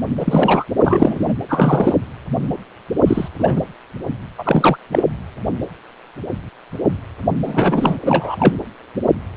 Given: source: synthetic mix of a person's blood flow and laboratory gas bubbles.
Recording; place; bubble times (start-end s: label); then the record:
Doppler ultrasound of blood flow; precordium
0.19-0.65 s: bubbles
0.83-1.33 s: bubbles
1.48-1.98 s: bubbles
3.07-3.28 s: bubbles
3.39-3.64 s: bubbles
4.38-4.78 s: bubbles
4.92-5.03 s: bubbles
7.46-7.96 s: bubbles
8.05-8.55 s: bubbles
From the record:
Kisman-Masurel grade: 223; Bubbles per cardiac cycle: several, 3 to 8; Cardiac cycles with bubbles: 10 to 50%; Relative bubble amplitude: loud (0.450 to 0.775); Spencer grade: 2 (many but less than half of the cardiac periods contain bubble signals, singularly or in groups); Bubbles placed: anywhere in the cardiac cycle